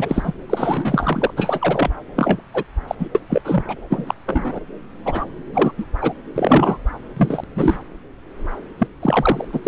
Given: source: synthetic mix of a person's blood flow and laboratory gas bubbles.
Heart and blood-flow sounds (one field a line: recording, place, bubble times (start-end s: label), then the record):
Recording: Doppler ultrasound of blood flow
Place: subclavian vein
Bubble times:
0.00-0.34 s: bubbles
0.49-1.31 s: bubbles
1.36-1.90 s: bubbles
2.16-2.41 s: bubbles
2.54-2.64 s: bubbles
2.87-2.95 s: bubbles
2.99-3.08 s: bubbles
3.15-3.20 s: bubbles
3.29-3.42 s: bubbles
3.44-3.64 s: bubbles
3.67-3.76 s: bubbles
3.90-4.15 s: bubbles
4.25-4.60 s: bubbles
5.05-5.25 s: bubbles
5.52-5.71 s: bubbles
5.78-5.85 s: bubbles
6.01-6.13 s: bubbles
6.36-6.78 s: bubbles
7.17-7.44 s: bubbles
7.55-7.78 s: bubbles
8.78-8.87 s: bubbles
9.01-9.44 s: bubbles
9.52-9.59 s: bubbles
9.63-9.68 s: bubbles
From the record:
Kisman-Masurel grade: 242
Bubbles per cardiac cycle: several, 3 to 8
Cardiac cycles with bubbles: 100%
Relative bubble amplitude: moderate (0.250 to 0.450)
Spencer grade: 3 (all of the cardiac periods contain showers or single bubble signals, but not dominating or overriding the cardiac motion signals)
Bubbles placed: anywhere in the cardiac cycle